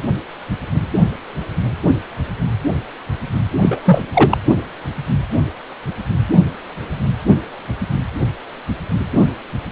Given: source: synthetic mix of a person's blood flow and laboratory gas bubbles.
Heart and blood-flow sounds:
Doppler ultrasound of blood flow; precordium
3.61-3.80 s: bubbles
3.85-4.03 s: bubbles
4.13-4.38 s: bubbles
From the record:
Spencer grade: 1 (occasional bubble signal discernible with the cardiac motion signal, with majority of cardiac periods free of bubbles); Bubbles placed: only in the low amplitude regions of the cardiac cycle

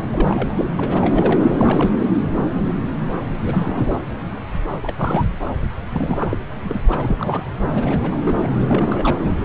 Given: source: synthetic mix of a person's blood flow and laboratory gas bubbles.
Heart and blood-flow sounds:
Doppler ultrasound of blood flow; subclavian vein
0.00-0.03 s: bubbles
0.11-0.66 s: bubbles
0.77-1.41 s: bubbles
1.44-1.94 s: bubbles
3.44-3.99 s: bubbles
4.72-4.79 s: bubbles
4.82-5.29 s: bubbles
5.92-6.40 s: bubbles
6.64-6.79 s: bubbles
6.85-7.42 s: bubbles
7.72-8.16 s: bubbles
8.23-8.39 s: bubbles
8.42-8.66 s: bubbles
8.69-9.35 s: bubbles
From the record:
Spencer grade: 3 (all of the cardiac periods contain showers or single bubble signals, but not dominating or overriding the cardiac motion signals); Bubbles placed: anywhere in the cardiac cycle

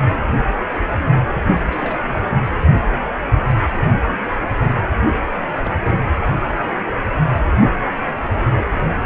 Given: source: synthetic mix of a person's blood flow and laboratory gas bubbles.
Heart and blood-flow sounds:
Doppler ultrasound of blood flow; precordium
1.69-1.98 s: bubbles
5.62-5.72 s: bubbles
From the record:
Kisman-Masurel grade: 121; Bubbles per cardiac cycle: 1 to 2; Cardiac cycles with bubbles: 10 to 50%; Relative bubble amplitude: barely perceptible (0.100 to 0.250); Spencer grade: 2 (many but less than half of the cardiac periods contain bubble signals, singularly or in groups); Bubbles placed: anywhere in the cardiac cycle

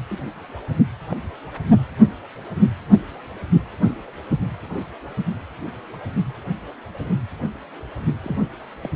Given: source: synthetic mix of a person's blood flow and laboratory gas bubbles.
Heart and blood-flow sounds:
Doppler ultrasound of blood flow; precordium
0.09-0.24 s: bubbles
1.09-1.17 s: bubbles
8.23-8.38 s: bubbles
8.83-8.90 s: bubbles
From the record:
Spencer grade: 2 (many but less than half of the cardiac periods contain bubble signals, singularly or in groups); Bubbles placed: only in the low amplitude regions of the cardiac cycle

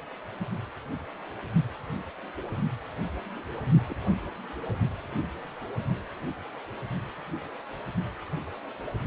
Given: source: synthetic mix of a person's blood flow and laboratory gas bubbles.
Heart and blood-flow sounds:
Doppler ultrasound of blood flow; precordium
3.89-3.94 s: bubbles
From the record:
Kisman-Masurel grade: 121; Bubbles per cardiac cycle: 1 to 2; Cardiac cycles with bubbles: 10 to 50%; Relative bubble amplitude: barely perceptible (0.100 to 0.250); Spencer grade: 2 (many but less than half of the cardiac periods contain bubble signals, singularly or in groups); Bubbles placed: anywhere in the cardiac cycle

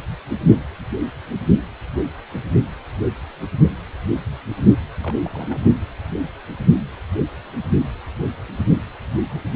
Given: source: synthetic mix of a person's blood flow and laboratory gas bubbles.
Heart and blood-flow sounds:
Doppler ultrasound of blood flow; precordium
5.00-5.15 s: bubbles
5.24-5.69 s: bubbles
From the record:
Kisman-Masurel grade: 211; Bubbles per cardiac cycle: several, 3 to 8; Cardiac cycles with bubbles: 1 to 10%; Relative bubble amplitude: barely perceptible (0.100 to 0.250); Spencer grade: 1 (occasional bubble signal discernible with the cardiac motion signal, with majority of cardiac periods free of bubbles); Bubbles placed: anywhere in the cardiac cycle

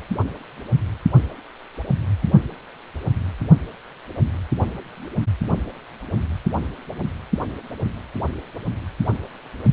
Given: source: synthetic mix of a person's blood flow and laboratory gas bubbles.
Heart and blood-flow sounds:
Doppler ultrasound of blood flow; precordium
no bubbles
From the record:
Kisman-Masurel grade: 000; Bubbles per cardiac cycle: 0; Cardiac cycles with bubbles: 0%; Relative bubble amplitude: no bubbles discernible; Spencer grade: 0 (complete lack of bubble signals)

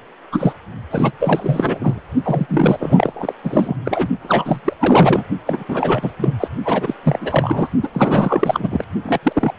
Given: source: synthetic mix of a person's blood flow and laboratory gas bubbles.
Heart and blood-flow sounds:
Doppler ultrasound of blood flow; precordium
0.32-0.53 s: bubbles
0.91-1.12 s: bubbles
1.19-2.01 s: bubbles
2.23-3.34 s: bubbles
3.44-3.75 s: bubbles
3.85-4.09 s: bubbles
4.23-4.61 s: bubbles
4.64-4.74 s: bubbles
4.79-5.24 s: bubbles
5.46-5.63 s: bubbles
5.68-6.12 s: bubbles
6.18-6.38 s: bubbles
6.40-6.48 s: bubbles
6.64-6.94 s: bubbles
7.03-7.71 s: bubbles
7.83-7.90 s: bubbles
7.92-8.85 s: bubbles
9.03-9.19 s: bubbles
9.23-9.53 s: bubbles
From the record:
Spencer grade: 4 (maximum detectable bubble signal sounding continuously throughout systole and diastole of every cardiac period, and overriding the amplitude of the normal cardiac signals); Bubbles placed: only in the low amplitude regions of the cardiac cycle

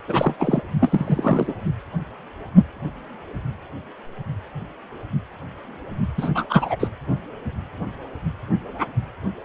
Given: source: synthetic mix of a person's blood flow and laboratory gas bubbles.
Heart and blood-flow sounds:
Doppler ultrasound of blood flow; precordium
0.07-0.34 s: bubbles
0.40-0.61 s: bubbles
0.80-1.53 s: bubbles
6.17-6.29 s: bubbles
6.34-6.45 s: bubbles
6.49-6.76 s: bubbles
6.79-6.88 s: bubbles
From the record:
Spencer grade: 2 (many but less than half of the cardiac periods contain bubble signals, singularly or in groups); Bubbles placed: only in the low amplitude regions of the cardiac cycle

